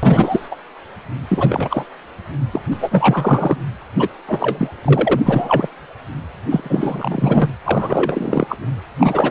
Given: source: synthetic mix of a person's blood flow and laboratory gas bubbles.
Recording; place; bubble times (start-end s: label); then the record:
Doppler ultrasound of blood flow; precordium
0.02-0.56 s: bubbles
1.28-1.84 s: bubbles
2.53-2.62 s: bubbles
2.71-3.58 s: bubbles
3.95-4.09 s: bubbles
4.27-4.69 s: bubbles
4.84-5.20 s: bubbles
5.24-5.69 s: bubbles
6.50-7.50 s: bubbles
7.64-8.46 s: bubbles
8.48-8.57 s: bubbles
9.00-9.31 s: bubbles
From the record:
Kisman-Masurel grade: 333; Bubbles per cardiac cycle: rolling drumbeat, 9 or more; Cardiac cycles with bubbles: 50 to 99%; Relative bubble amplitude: loud (0.450 to 0.775); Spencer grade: 3 (all of the cardiac periods contain showers or single bubble signals, but not dominating or overriding the cardiac motion signals); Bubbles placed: anywhere in the cardiac cycle